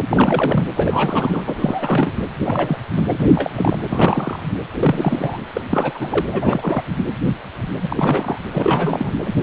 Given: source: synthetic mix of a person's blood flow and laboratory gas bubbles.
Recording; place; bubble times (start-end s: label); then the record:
Doppler ultrasound of blood flow; precordium
0.09-0.64 s: bubbles
0.76-1.42 s: bubbles
1.46-2.16 s: bubbles
2.45-2.78 s: bubbles
2.95-3.13 s: bubbles
3.20-3.29 s: bubbles
3.35-3.50 s: bubbles
3.53-3.77 s: bubbles
3.90-4.41 s: bubbles
4.79-5.39 s: bubbles
5.54-5.61 s: bubbles
5.71-6.27 s: bubbles
6.29-6.82 s: bubbles
7.82-8.38 s: bubbles
8.51-9.14 s: bubbles
9.24-9.36 s: bubbles
From the record:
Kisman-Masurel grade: 332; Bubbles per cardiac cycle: rolling drumbeat, 9 or more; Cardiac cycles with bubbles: 50 to 99%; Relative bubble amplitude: moderate (0.250 to 0.450); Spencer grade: 3 (all of the cardiac periods contain showers or single bubble signals, but not dominating or overriding the cardiac motion signals); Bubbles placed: anywhere in the cardiac cycle